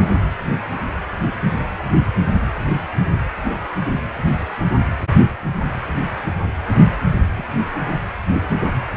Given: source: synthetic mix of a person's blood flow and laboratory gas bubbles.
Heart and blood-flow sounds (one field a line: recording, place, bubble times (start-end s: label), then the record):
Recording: Doppler ultrasound of blood flow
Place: precordium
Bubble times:
7.36-7.46 s: bubbles
From the record:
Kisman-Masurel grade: 111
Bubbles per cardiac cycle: 1 to 2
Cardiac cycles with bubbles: 1 to 10%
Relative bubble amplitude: barely perceptible (0.100 to 0.250)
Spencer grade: 1 (occasional bubble signal discernible with the cardiac motion signal, with majority of cardiac periods free of bubbles)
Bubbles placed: anywhere in the cardiac cycle